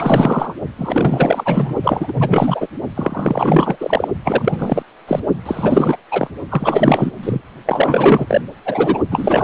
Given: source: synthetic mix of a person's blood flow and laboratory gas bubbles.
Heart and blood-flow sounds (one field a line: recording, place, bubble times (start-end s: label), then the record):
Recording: Doppler ultrasound of blood flow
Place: precordium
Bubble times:
0.00-0.54 s: bubbles
0.78-1.76 s: bubbles
1.83-2.67 s: bubbles
2.94-3.76 s: bubbles
3.80-4.08 s: bubbles
4.24-4.83 s: bubbles
5.08-5.20 s: bubbles
5.45-5.97 s: bubbles
6.12-6.28 s: bubbles
6.49-7.11 s: bubbles
7.22-7.42 s: bubbles
7.66-8.41 s: bubbles
8.65-9.00 s: bubbles
9.10-9.44 s: bubbles
From the record:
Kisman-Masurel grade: 444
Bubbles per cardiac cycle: continuous sound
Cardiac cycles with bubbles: 100%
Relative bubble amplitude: maximal (0.775 to 0.999)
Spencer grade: 4 (maximum detectable bubble signal sounding continuously throughout systole and diastole of every cardiac period, and overriding the amplitude of the normal cardiac signals)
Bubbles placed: only in the low amplitude regions of the cardiac cycle